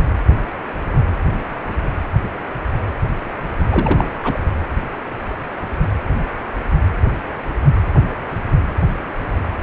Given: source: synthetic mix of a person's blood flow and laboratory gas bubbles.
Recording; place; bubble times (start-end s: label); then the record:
Doppler ultrasound of blood flow; precordium
3.70-4.10 s: bubbles
4.23-4.39 s: bubbles
From the record:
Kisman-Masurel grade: 212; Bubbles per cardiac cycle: several, 3 to 8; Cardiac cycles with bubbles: 1 to 10%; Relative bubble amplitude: moderate (0.250 to 0.450); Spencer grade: 1 (occasional bubble signal discernible with the cardiac motion signal, with majority of cardiac periods free of bubbles); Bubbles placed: anywhere in the cardiac cycle